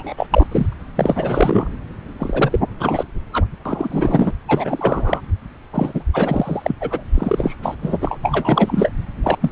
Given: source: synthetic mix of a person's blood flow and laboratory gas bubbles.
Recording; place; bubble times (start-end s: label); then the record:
Doppler ultrasound of blood flow; subclavian vein
0.00-0.14 s: bubbles
0.17-0.27 s: bubbles
0.30-0.46 s: bubbles
0.52-0.66 s: bubbles
0.95-1.72 s: bubbles
2.19-2.59 s: bubbles
2.79-3.04 s: bubbles
3.33-3.45 s: bubbles
3.65-4.31 s: bubbles
4.48-5.21 s: bubbles
5.72-6.03 s: bubbles
6.13-6.75 s: bubbles
6.80-7.03 s: bubbles
7.14-7.55 s: bubbles
7.62-7.75 s: bubbles
7.82-7.98 s: bubbles
8.01-8.18 s: bubbles
8.23-8.89 s: bubbles
9.24-9.37 s: bubbles
9.41-9.51 s: bubbles
From the record:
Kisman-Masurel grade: 343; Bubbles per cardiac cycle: rolling drumbeat, 9 or more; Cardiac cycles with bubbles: 100%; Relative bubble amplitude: loud (0.450 to 0.775); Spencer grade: 3 (all of the cardiac periods contain showers or single bubble signals, but not dominating or overriding the cardiac motion signals); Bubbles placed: anywhere in the cardiac cycle